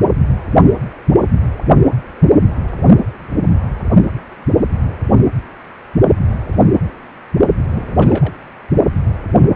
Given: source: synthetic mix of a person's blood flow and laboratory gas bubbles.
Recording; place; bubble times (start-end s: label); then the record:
Doppler ultrasound of blood flow; precordium
7.68-8.34 s: bubbles
From the record:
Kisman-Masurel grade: 211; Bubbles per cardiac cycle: several, 3 to 8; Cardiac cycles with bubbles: 1 to 10%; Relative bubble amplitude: barely perceptible (0.100 to 0.250); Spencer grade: 1 (occasional bubble signal discernible with the cardiac motion signal, with majority of cardiac periods free of bubbles); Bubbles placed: only in the low amplitude regions of the cardiac cycle